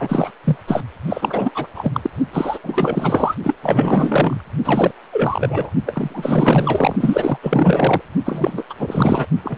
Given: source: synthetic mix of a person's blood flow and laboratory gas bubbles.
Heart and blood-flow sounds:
Doppler ultrasound of blood flow; precordium
0.00-0.31 s: bubbles
0.44-0.57 s: bubbles
0.67-0.84 s: bubbles
1.06-1.51 s: bubbles
1.54-1.67 s: bubbles
1.74-2.10 s: bubbles
2.33-2.59 s: bubbles
2.64-3.35 s: bubbles
3.43-3.56 s: bubbles
3.62-4.41 s: bubbles
4.64-4.91 s: bubbles
5.12-5.73 s: bubbles
5.86-6.96 s: bubbles
7.00-7.38 s: bubbles
7.42-8.02 s: bubbles
8.25-8.63 s: bubbles
8.70-8.76 s: bubbles
8.79-9.26 s: bubbles
9.43-9.58 s: bubbles
From the record:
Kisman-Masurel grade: 444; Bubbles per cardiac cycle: continuous sound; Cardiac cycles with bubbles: 100%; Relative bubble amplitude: maximal (0.775 to 0.999); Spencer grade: 4 (maximum detectable bubble signal sounding continuously throughout systole and diastole of every cardiac period, and overriding the amplitude of the normal cardiac signals); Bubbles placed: only in the low amplitude regions of the cardiac cycle

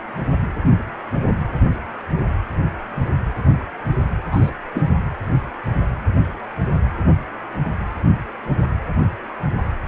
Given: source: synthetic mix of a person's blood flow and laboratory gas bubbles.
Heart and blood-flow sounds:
Doppler ultrasound of blood flow; precordium
4.31-4.50 s: bubbles
4.74-4.82 s: bubbles
From the record:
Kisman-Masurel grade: 113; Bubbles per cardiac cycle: 1 to 2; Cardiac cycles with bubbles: 1 to 10%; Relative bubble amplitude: loud (0.450 to 0.775); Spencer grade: 1 (occasional bubble signal discernible with the cardiac motion signal, with majority of cardiac periods free of bubbles); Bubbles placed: anywhere in the cardiac cycle

